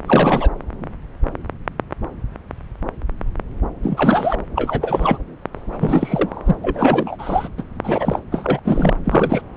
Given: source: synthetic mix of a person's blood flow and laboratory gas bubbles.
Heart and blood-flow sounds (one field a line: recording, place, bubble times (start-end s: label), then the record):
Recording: Doppler ultrasound of blood flow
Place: subclavian vein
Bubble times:
0.06-0.50 s: bubbles
3.82-4.38 s: bubbles
4.55-5.18 s: bubbles
5.53-6.55 s: bubbles
6.63-7.16 s: bubbles
7.18-7.48 s: bubbles
7.58-7.63 s: bubbles
7.83-8.20 s: bubbles
8.31-8.60 s: bubbles
8.65-8.95 s: bubbles
9.05-9.42 s: bubbles
From the record:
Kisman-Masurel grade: 333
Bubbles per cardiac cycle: rolling drumbeat, 9 or more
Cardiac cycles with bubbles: 50 to 99%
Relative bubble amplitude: loud (0.450 to 0.775)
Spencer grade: 3 (all of the cardiac periods contain showers or single bubble signals, but not dominating or overriding the cardiac motion signals)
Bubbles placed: anywhere in the cardiac cycle